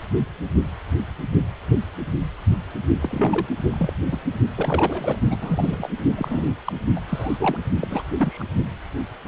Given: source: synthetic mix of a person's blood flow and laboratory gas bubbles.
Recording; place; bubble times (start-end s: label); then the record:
Doppler ultrasound of blood flow; precordium
3.00-3.46 s: bubbles
3.68-3.93 s: bubbles
4.11-4.19 s: bubbles
4.55-5.18 s: bubbles
5.30-5.89 s: bubbles
6.15-6.49 s: bubbles
6.64-6.72 s: bubbles
6.95-7.00 s: bubbles
7.07-7.57 s: bubbles
7.80-8.03 s: bubbles
8.17-8.43 s: bubbles
From the record:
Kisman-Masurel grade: 232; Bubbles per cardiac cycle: several, 3 to 8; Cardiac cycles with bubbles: 50 to 99%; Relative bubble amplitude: moderate (0.250 to 0.450); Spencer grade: 3 (all of the cardiac periods contain showers or single bubble signals, but not dominating or overriding the cardiac motion signals); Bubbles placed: only in the low amplitude regions of the cardiac cycle